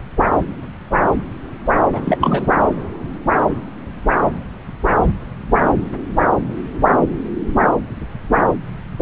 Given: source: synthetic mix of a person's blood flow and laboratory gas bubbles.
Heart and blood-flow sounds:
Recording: Doppler ultrasound of blood flow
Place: subclavian vein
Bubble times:
1.92-2.17 s: bubbles
2.21-2.48 s: bubbles
From the record:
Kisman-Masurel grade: 213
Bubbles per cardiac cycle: several, 3 to 8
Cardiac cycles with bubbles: 1 to 10%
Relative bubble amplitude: loud (0.450 to 0.775)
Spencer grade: 1 (occasional bubble signal discernible with the cardiac motion signal, with majority of cardiac periods free of bubbles)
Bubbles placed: anywhere in the cardiac cycle

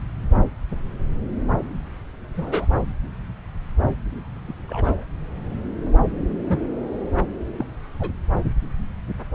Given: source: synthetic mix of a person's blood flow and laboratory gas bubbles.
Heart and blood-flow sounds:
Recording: Doppler ultrasound of blood flow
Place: subclavian vein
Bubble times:
2.36-2.67 s: bubbles
4.48-4.54 s: bubbles
4.68-5.04 s: bubbles
6.46-6.60 s: bubbles
7.58-7.67 s: bubbles
7.99-8.11 s: bubbles
From the record:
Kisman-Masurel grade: 122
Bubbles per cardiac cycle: 1 to 2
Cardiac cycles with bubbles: 10 to 50%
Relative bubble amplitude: moderate (0.250 to 0.450)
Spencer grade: 2 (many but less than half of the cardiac periods contain bubble signals, singularly or in groups)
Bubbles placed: anywhere in the cardiac cycle

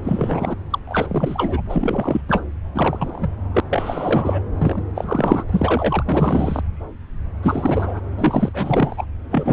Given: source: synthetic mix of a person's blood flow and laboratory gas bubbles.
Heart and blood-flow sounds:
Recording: Doppler ultrasound of blood flow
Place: subclavian vein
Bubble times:
0.04-0.57 s: bubbles
0.70-0.79 s: bubbles
0.87-1.62 s: bubbles
1.69-2.21 s: bubbles
2.27-2.42 s: bubbles
2.75-3.30 s: bubbles
3.53-3.60 s: bubbles
3.70-4.43 s: bubbles
4.58-4.83 s: bubbles
4.95-5.44 s: bubbles
5.49-6.62 s: bubbles
7.42-8.01 s: bubbles
8.19-9.06 s: bubbles
9.31-9.53 s: bubbles
From the record:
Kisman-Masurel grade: 333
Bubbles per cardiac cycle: rolling drumbeat, 9 or more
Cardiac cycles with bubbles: 50 to 99%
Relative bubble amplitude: loud (0.450 to 0.775)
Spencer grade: 3 (all of the cardiac periods contain showers or single bubble signals, but not dominating or overriding the cardiac motion signals)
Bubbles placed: anywhere in the cardiac cycle

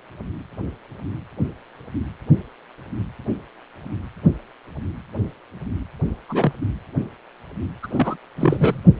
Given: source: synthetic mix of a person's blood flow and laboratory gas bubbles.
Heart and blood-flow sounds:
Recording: Doppler ultrasound of blood flow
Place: precordium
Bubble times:
6.29-6.53 s: bubbles
7.83-7.87 s: bubbles
7.93-8.17 s: bubbles
8.37-8.80 s: bubbles
From the record:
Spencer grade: 2 (many but less than half of the cardiac periods contain bubble signals, singularly or in groups)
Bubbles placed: anywhere in the cardiac cycle

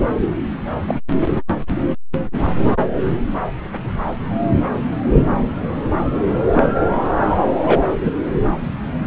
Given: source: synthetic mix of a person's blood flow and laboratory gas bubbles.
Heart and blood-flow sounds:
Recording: Doppler ultrasound of blood flow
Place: subclavian vein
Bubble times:
0.88-0.95 s: bubbles
1.20-1.28 s: bubbles
6.52-6.67 s: bubbles
7.27-7.37 s: bubbles
7.62-7.84 s: bubbles
8.03-8.13 s: bubbles
From the record:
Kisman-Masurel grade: 123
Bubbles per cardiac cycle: 1 to 2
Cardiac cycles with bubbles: 10 to 50%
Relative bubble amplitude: loud (0.450 to 0.775)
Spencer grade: 2 (many but less than half of the cardiac periods contain bubble signals, singularly or in groups)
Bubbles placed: anywhere in the cardiac cycle

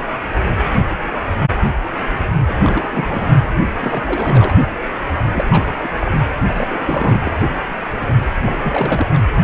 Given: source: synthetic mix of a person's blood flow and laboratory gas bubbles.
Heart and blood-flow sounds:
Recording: Doppler ultrasound of blood flow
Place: precordium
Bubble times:
2.46-2.54 s: bubbles
2.57-3.44 s: bubbles
3.79-4.04 s: bubbles
4.06-4.54 s: bubbles
5.34-5.45 s: bubbles
5.50-5.72 s: bubbles
5.83-5.92 s: bubbles
6.00-6.12 s: bubbles
6.40-6.67 s: bubbles
6.71-7.32 s: bubbles
8.43-8.57 s: bubbles
8.64-9.06 s: bubbles
9.13-9.18 s: bubbles
9.41-9.44 s: bubbles
From the record:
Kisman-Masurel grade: 332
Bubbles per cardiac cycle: rolling drumbeat, 9 or more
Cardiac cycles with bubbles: 50 to 99%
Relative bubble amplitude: moderate (0.250 to 0.450)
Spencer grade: 3 (all of the cardiac periods contain showers or single bubble signals, but not dominating or overriding the cardiac motion signals)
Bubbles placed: anywhere in the cardiac cycle

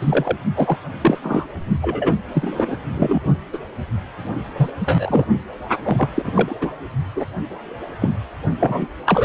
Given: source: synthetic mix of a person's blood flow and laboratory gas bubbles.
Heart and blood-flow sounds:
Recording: Doppler ultrasound of blood flow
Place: precordium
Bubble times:
0.00-0.37 s: bubbles
0.54-0.77 s: bubbles
1.01-1.19 s: bubbles
1.23-1.46 s: bubbles
1.82-2.14 s: bubbles
2.33-2.76 s: bubbles
2.94-3.20 s: bubbles
3.53-3.58 s: bubbles
4.58-4.70 s: bubbles
4.80-5.25 s: bubbles
5.83-6.09 s: bubbles
6.14-6.56 s: bubbles
6.61-6.69 s: bubbles
7.15-7.26 s: bubbles
8.02-8.11 s: bubbles
8.60-8.87 s: bubbles
9.05-9.25 s: bubbles
From the record:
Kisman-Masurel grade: 242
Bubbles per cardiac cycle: several, 3 to 8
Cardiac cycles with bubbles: 100%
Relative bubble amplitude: moderate (0.250 to 0.450)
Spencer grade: 3 (all of the cardiac periods contain showers or single bubble signals, but not dominating or overriding the cardiac motion signals)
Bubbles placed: only in the low amplitude regions of the cardiac cycle

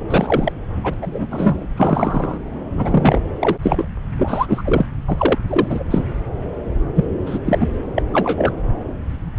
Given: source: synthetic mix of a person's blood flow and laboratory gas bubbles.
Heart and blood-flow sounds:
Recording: Doppler ultrasound of blood flow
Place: subclavian vein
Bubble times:
0.08-0.52 s: bubbles
0.83-0.94 s: bubbles
1.01-1.26 s: bubbles
1.30-1.66 s: bubbles
1.77-2.38 s: bubbles
2.77-3.21 s: bubbles
3.40-3.55 s: bubbles
3.62-3.88 s: bubbles
4.17-4.86 s: bubbles
5.07-5.38 s: bubbles
5.47-5.84 s: bubbles
5.91-6.08 s: bubbles
6.96-7.05 s: bubbles
7.26-7.39 s: bubbles
7.45-7.68 s: bubbles
7.95-8.03 s: bubbles
8.13-8.53 s: bubbles
From the record:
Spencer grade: 3 (all of the cardiac periods contain showers or single bubble signals, but not dominating or overriding the cardiac motion signals)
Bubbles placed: anywhere in the cardiac cycle

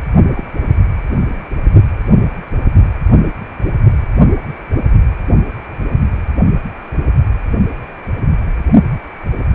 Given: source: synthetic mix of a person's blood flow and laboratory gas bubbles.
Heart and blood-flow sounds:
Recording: Doppler ultrasound of blood flow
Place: precordium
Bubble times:
0.35-0.44 s: bubbles
From the record:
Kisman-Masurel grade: 212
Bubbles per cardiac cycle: several, 3 to 8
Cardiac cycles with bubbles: 1 to 10%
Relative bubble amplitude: moderate (0.250 to 0.450)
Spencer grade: 1 (occasional bubble signal discernible with the cardiac motion signal, with majority of cardiac periods free of bubbles)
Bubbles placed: only in the low amplitude regions of the cardiac cycle

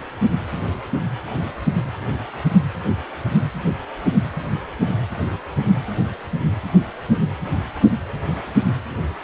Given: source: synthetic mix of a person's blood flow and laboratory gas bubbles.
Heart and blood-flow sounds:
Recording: Doppler ultrasound of blood flow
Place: precordium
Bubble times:
no bubbles
From the record:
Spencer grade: 0 (complete lack of bubble signals)

